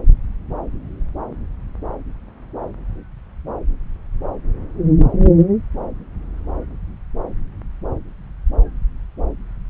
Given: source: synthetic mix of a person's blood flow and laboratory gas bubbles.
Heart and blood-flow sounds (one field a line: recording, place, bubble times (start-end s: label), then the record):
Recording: Doppler ultrasound of blood flow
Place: subclavian vein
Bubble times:
no bubbles
From the record:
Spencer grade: 0 (complete lack of bubble signals)